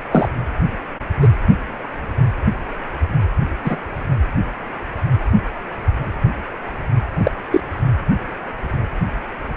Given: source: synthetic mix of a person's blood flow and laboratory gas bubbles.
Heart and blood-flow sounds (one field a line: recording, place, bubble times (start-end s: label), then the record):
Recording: Doppler ultrasound of blood flow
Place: precordium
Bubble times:
0.11-0.29 s: bubbles
1.21-1.28 s: bubbles
3.65-3.77 s: bubbles
7.23-7.32 s: bubbles
7.51-7.61 s: bubbles
From the record:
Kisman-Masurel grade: 123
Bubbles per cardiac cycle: 1 to 2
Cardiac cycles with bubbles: 10 to 50%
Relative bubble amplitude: loud (0.450 to 0.775)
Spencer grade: 2 (many but less than half of the cardiac periods contain bubble signals, singularly or in groups)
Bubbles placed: anywhere in the cardiac cycle